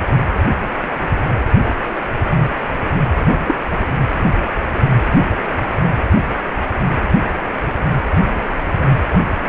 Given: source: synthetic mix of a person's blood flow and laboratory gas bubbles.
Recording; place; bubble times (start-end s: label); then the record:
Doppler ultrasound of blood flow; precordium
3.47-3.55 s: bubbles
From the record:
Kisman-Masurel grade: 112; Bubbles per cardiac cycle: 1 to 2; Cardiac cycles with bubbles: 1 to 10%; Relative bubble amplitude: moderate (0.250 to 0.450); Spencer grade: 1 (occasional bubble signal discernible with the cardiac motion signal, with majority of cardiac periods free of bubbles); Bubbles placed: anywhere in the cardiac cycle